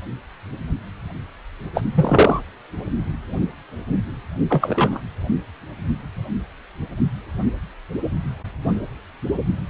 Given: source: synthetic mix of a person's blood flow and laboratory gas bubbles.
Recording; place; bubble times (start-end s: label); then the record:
Doppler ultrasound of blood flow; precordium
1.74-1.82 s: bubbles
1.95-2.40 s: bubbles
4.49-5.01 s: bubbles
From the record:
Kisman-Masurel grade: 223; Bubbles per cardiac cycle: several, 3 to 8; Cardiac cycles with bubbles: 10 to 50%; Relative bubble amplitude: loud (0.450 to 0.775); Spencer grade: 2 (many but less than half of the cardiac periods contain bubble signals, singularly or in groups); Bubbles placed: anywhere in the cardiac cycle